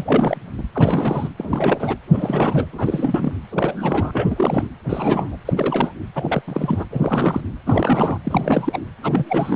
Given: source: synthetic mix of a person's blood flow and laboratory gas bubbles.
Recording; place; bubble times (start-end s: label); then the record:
Doppler ultrasound of blood flow; precordium
0.00-0.40 s: bubbles
0.57-0.63 s: bubbles
0.73-1.29 s: bubbles
1.38-1.97 s: bubbles
2.11-2.67 s: bubbles
2.72-3.32 s: bubbles
3.51-4.67 s: bubbles
4.89-5.37 s: bubbles
5.45-5.53 s: bubbles
5.56-5.92 s: bubbles
6.15-6.42 s: bubbles
6.47-6.86 s: bubbles
6.91-7.41 s: bubbles
7.66-8.19 s: bubbles
8.24-8.80 s: bubbles
9.03-9.56 s: bubbles
From the record:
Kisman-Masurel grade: 342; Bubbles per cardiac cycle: rolling drumbeat, 9 or more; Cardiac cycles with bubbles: 100%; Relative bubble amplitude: moderate (0.250 to 0.450); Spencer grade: 3 (all of the cardiac periods contain showers or single bubble signals, but not dominating or overriding the cardiac motion signals); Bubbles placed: anywhere in the cardiac cycle